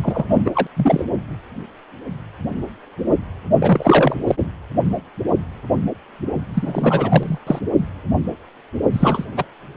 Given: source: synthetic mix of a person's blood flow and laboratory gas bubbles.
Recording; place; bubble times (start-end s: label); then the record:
Doppler ultrasound of blood flow; precordium
0.03-0.24 s: bubbles
0.29-0.51 s: bubbles
0.54-0.67 s: bubbles
0.77-1.04 s: bubbles
3.58-4.16 s: bubbles
4.27-4.35 s: bubbles
6.53-7.38 s: bubbles
7.46-7.59 s: bubbles
8.93-9.25 s: bubbles
9.36-9.45 s: bubbles
From the record:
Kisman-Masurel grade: 233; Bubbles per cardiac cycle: several, 3 to 8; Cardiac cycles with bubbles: 50 to 99%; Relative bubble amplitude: loud (0.450 to 0.775); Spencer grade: 3 (all of the cardiac periods contain showers or single bubble signals, but not dominating or overriding the cardiac motion signals); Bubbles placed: only in the low amplitude regions of the cardiac cycle